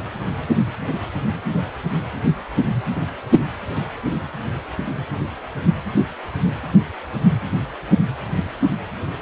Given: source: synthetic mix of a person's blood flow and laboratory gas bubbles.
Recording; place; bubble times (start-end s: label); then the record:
Doppler ultrasound of blood flow; precordium
no bubbles
From the record:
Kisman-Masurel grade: 000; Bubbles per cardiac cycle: 0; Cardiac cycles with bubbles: 0%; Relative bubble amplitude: no bubbles discernible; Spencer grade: 0 (complete lack of bubble signals)